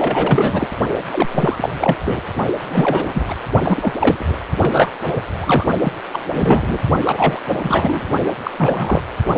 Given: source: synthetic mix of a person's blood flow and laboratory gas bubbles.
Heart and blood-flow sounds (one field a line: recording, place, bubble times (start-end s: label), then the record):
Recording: Doppler ultrasound of blood flow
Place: precordium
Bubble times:
0.00-0.67 s: bubbles
1.12-1.27 s: bubbles
1.31-1.98 s: bubbles
2.05-2.22 s: bubbles
2.69-3.35 s: bubbles
3.62-3.93 s: bubbles
3.99-4.36 s: bubbles
4.61-4.90 s: bubbles
5.03-5.22 s: bubbles
5.41-5.66 s: bubbles
5.81-5.93 s: bubbles
6.12-6.20 s: bubbles
6.34-6.79 s: bubbles
7.04-7.40 s: bubbles
7.48-8.01 s: bubbles
8.43-8.51 s: bubbles
8.58-9.01 s: bubbles
From the record:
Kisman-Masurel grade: 333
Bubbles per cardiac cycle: rolling drumbeat, 9 or more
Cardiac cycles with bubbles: 50 to 99%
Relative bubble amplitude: loud (0.450 to 0.775)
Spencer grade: 3 (all of the cardiac periods contain showers or single bubble signals, but not dominating or overriding the cardiac motion signals)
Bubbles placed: only in the low amplitude regions of the cardiac cycle